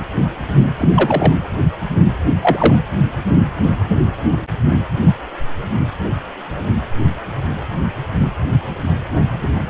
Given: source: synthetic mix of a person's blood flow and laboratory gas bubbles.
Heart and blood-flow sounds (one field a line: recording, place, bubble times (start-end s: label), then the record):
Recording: Doppler ultrasound of blood flow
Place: precordium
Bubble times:
0.78-1.33 s: bubbles
2.41-2.75 s: bubbles
From the record:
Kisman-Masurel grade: 113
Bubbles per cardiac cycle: 1 to 2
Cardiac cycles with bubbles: 1 to 10%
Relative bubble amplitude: loud (0.450 to 0.775)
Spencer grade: 1 (occasional bubble signal discernible with the cardiac motion signal, with majority of cardiac periods free of bubbles)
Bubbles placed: anywhere in the cardiac cycle